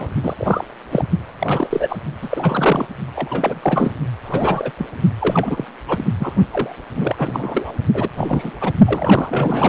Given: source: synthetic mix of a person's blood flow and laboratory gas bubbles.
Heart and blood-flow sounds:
Doppler ultrasound of blood flow; precordium
0.00-0.09 s: bubbles
0.23-0.64 s: bubbles
0.91-1.04 s: bubbles
1.39-1.99 s: bubbles
2.21-2.87 s: bubbles
3.15-3.91 s: bubbles
4.25-4.71 s: bubbles
4.78-4.87 s: bubbles
5.19-5.65 s: bubbles
5.88-6.04 s: bubbles
6.19-6.33 s: bubbles
6.53-6.74 s: bubbles
6.95-7.79 s: bubbles
7.94-8.09 s: bubbles
8.17-8.51 s: bubbles
8.61-8.72 s: bubbles
8.85-9.69 s: bubbles
From the record:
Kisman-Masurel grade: 343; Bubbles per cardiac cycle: rolling drumbeat, 9 or more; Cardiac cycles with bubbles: 100%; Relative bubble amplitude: loud (0.450 to 0.775); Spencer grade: 3 (all of the cardiac periods contain showers or single bubble signals, but not dominating or overriding the cardiac motion signals); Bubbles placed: only in the low amplitude regions of the cardiac cycle

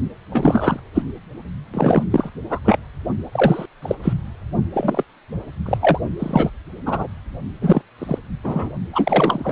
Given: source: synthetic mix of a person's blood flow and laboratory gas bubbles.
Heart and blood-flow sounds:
Doppler ultrasound of blood flow; precordium
0.30-0.80 s: bubbles
0.94-1.03 s: bubbles
1.73-2.03 s: bubbles
2.12-2.30 s: bubbles
2.50-2.59 s: bubbles
2.64-2.77 s: bubbles
3.32-3.66 s: bubbles
3.82-3.95 s: bubbles
4.03-4.13 s: bubbles
4.74-5.04 s: bubbles
5.66-5.78 s: bubbles
5.81-5.99 s: bubbles
6.19-6.50 s: bubbles
6.86-7.08 s: bubbles
7.61-7.81 s: bubbles
7.98-8.19 s: bubbles
8.44-8.71 s: bubbles
8.93-9.52 s: bubbles
From the record:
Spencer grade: 3 (all of the cardiac periods contain showers or single bubble signals, but not dominating or overriding the cardiac motion signals); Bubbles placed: only in the low amplitude regions of the cardiac cycle

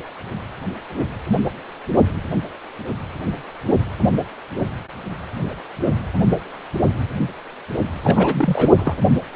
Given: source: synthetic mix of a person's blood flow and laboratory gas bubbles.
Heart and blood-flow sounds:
Doppler ultrasound of blood flow; precordium
8.04-8.76 s: bubbles
8.78-8.94 s: bubbles
From the record:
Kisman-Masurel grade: 212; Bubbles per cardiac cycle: several, 3 to 8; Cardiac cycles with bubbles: 1 to 10%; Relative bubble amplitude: moderate (0.250 to 0.450); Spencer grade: 1 (occasional bubble signal discernible with the cardiac motion signal, with majority of cardiac periods free of bubbles); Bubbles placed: anywhere in the cardiac cycle

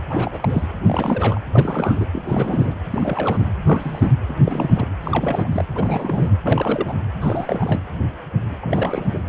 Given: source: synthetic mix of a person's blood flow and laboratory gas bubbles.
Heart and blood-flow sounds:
Doppler ultrasound of blood flow; precordium
0.09-0.67 s: bubbles
0.83-1.39 s: bubbles
1.52-2.06 s: bubbles
2.12-2.22 s: bubbles
2.27-2.75 s: bubbles
2.90-3.46 s: bubbles
3.65-4.12 s: bubbles
4.28-4.34 s: bubbles
4.44-4.88 s: bubbles
5.04-5.49 s: bubbles
5.52-5.65 s: bubbles
5.75-6.32 s: bubbles
6.42-6.93 s: bubbles
7.21-7.80 s: bubbles
8.60-9.22 s: bubbles
From the record:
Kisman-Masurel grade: 332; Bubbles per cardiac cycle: rolling drumbeat, 9 or more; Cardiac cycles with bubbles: 50 to 99%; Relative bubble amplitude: moderate (0.250 to 0.450); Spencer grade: 3 (all of the cardiac periods contain showers or single bubble signals, but not dominating or overriding the cardiac motion signals); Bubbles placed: anywhere in the cardiac cycle

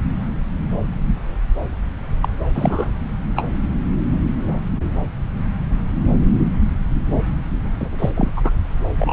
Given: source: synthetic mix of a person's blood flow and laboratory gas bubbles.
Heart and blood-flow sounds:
Doppler ultrasound of blood flow; subclavian vein
2.22-2.28 s: bubbles
2.54-2.88 s: bubbles
3.36-3.43 s: bubbles
7.80-7.90 s: bubbles
7.98-8.10 s: bubbles
8.16-8.30 s: bubbles
8.36-8.41 s: bubbles
8.44-8.51 s: bubbles
8.96-9.13 s: bubbles
From the record:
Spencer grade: 2 (many but less than half of the cardiac periods contain bubble signals, singularly or in groups); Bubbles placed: anywhere in the cardiac cycle

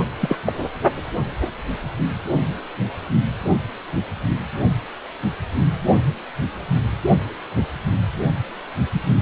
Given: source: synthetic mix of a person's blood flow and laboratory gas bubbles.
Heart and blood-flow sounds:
Doppler ultrasound of blood flow; precordium
0.20-0.36 s: bubbles
0.46-0.53 s: bubbles
From the record:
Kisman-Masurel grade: 212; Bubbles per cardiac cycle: several, 3 to 8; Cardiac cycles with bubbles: 1 to 10%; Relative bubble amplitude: moderate (0.250 to 0.450); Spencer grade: 1 (occasional bubble signal discernible with the cardiac motion signal, with majority of cardiac periods free of bubbles); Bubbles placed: only in the low amplitude regions of the cardiac cycle

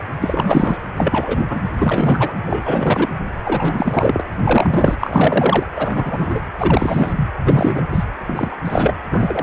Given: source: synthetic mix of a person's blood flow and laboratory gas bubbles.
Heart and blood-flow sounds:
Doppler ultrasound of blood flow; precordium
0.00-0.05 s: bubbles
0.20-0.78 s: bubbles
0.97-1.45 s: bubbles
1.49-1.61 s: bubbles
1.76-2.33 s: bubbles
2.46-3.09 s: bubbles
3.45-4.21 s: bubbles
4.43-4.98 s: bubbles
5.00-5.66 s: bubbles
5.75-6.41 s: bubbles
6.58-7.13 s: bubbles
7.15-7.29 s: bubbles
7.46-7.85 s: bubbles
7.90-8.04 s: bubbles
8.19-8.56 s: bubbles
8.65-8.95 s: bubbles
9.11-9.42 s: bubbles
From the record:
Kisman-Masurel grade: 343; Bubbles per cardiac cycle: rolling drumbeat, 9 or more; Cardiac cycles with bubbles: 100%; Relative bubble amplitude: loud (0.450 to 0.775); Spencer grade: 3 (all of the cardiac periods contain showers or single bubble signals, but not dominating or overriding the cardiac motion signals); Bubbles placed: anywhere in the cardiac cycle

